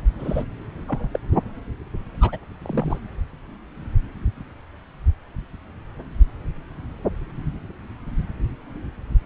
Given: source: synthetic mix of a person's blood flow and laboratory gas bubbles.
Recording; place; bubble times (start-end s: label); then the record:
Doppler ultrasound of blood flow; subclavian vein
0.19-0.45 s: bubbles
0.88-1.09 s: bubbles
1.13-1.19 s: bubbles
1.31-1.38 s: bubbles
2.21-2.39 s: bubbles
2.62-3.00 s: bubbles
From the record:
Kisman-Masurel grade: 222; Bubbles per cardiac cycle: several, 3 to 8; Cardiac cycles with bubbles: 10 to 50%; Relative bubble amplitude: moderate (0.250 to 0.450); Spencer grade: 2 (many but less than half of the cardiac periods contain bubble signals, singularly or in groups); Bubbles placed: anywhere in the cardiac cycle